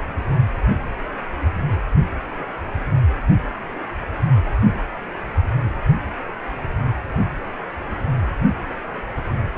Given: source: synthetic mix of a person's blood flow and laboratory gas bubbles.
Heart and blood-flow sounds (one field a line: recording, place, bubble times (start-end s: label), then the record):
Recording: Doppler ultrasound of blood flow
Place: precordium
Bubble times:
no bubbles
From the record:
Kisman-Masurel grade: 000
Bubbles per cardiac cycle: 0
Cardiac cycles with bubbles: 0%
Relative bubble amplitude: no bubbles discernible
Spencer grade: 0 (complete lack of bubble signals)